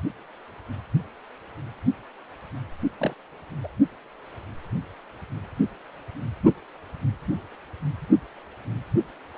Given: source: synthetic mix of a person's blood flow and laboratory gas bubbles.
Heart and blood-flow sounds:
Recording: Doppler ultrasound of blood flow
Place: precordium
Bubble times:
2.99-3.14 s: bubbles
3.63-3.68 s: bubbles
From the record:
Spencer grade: 2 (many but less than half of the cardiac periods contain bubble signals, singularly or in groups)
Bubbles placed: only in the low amplitude regions of the cardiac cycle

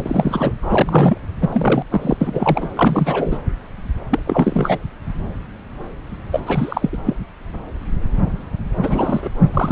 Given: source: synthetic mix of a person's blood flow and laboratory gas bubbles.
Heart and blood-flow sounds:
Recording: Doppler ultrasound of blood flow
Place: subclavian vein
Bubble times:
0.04-0.52 s: bubbles
0.62-1.18 s: bubbles
1.41-1.84 s: bubbles
1.91-2.17 s: bubbles
2.21-2.69 s: bubbles
2.76-3.40 s: bubbles
4.11-4.20 s: bubbles
4.27-4.79 s: bubbles
6.32-6.41 s: bubbles
6.46-6.90 s: bubbles
6.92-6.97 s: bubbles
7.04-7.16 s: bubbles
8.82-9.29 s: bubbles
9.54-9.72 s: bubbles
From the record:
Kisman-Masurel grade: 333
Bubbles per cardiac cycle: rolling drumbeat, 9 or more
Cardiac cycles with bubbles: 50 to 99%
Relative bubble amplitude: loud (0.450 to 0.775)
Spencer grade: 3 (all of the cardiac periods contain showers or single bubble signals, but not dominating or overriding the cardiac motion signals)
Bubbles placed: anywhere in the cardiac cycle

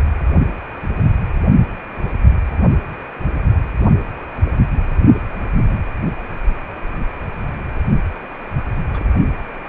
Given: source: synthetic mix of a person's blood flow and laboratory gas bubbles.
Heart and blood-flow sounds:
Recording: Doppler ultrasound of blood flow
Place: precordium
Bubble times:
8.94-9.10 s: bubbles
From the record:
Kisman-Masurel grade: 111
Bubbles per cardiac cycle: 1 to 2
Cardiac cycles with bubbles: 1 to 10%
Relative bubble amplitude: barely perceptible (0.100 to 0.250)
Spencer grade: 1 (occasional bubble signal discernible with the cardiac motion signal, with majority of cardiac periods free of bubbles)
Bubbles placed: only in the low amplitude regions of the cardiac cycle

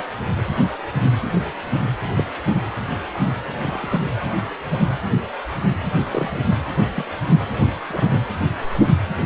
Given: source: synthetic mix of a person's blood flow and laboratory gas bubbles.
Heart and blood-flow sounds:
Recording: Doppler ultrasound of blood flow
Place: precordium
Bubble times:
2.15-2.23 s: bubbles
3.60-4.10 s: bubbles
6.04-6.46 s: bubbles
6.96-7.05 s: bubbles
7.59-7.67 s: bubbles
7.89-8.04 s: bubbles
From the record:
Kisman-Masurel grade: 121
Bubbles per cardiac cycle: 1 to 2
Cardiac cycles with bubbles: 10 to 50%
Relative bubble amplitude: barely perceptible (0.100 to 0.250)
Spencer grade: 2 (many but less than half of the cardiac periods contain bubble signals, singularly or in groups)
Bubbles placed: anywhere in the cardiac cycle

